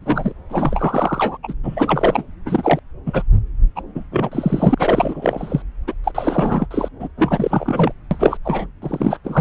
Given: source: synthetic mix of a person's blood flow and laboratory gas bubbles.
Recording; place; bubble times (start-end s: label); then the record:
Doppler ultrasound of blood flow; subclavian vein
0.01-0.33 s: bubbles
0.49-1.38 s: bubbles
1.43-1.54 s: bubbles
1.64-2.23 s: bubbles
2.46-2.79 s: bubbles
3.06-3.23 s: bubbles
3.76-3.81 s: bubbles
3.95-4.04 s: bubbles
4.11-4.74 s: bubbles
4.77-5.62 s: bubbles
5.87-5.94 s: bubbles
6.04-6.12 s: bubbles
6.14-6.66 s: bubbles
6.71-6.88 s: bubbles
6.99-7.08 s: bubbles
7.17-7.92 s: bubbles
8.11-8.37 s: bubbles
8.44-8.66 s: bubbles
8.81-9.18 s: bubbles
9.23-9.41 s: bubbles
From the record:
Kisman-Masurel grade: 343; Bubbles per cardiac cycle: rolling drumbeat, 9 or more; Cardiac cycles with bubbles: 100%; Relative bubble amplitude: loud (0.450 to 0.775); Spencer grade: 3 (all of the cardiac periods contain showers or single bubble signals, but not dominating or overriding the cardiac motion signals); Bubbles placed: anywhere in the cardiac cycle